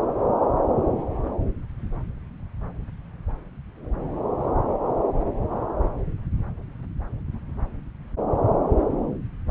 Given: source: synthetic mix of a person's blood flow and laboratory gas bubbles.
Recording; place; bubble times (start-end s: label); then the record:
Doppler ultrasound of blood flow; subclavian vein
no bubbles
From the record:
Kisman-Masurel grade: 000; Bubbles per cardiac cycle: 0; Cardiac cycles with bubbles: 0%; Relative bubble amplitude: no bubbles discernible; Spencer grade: 0 (complete lack of bubble signals)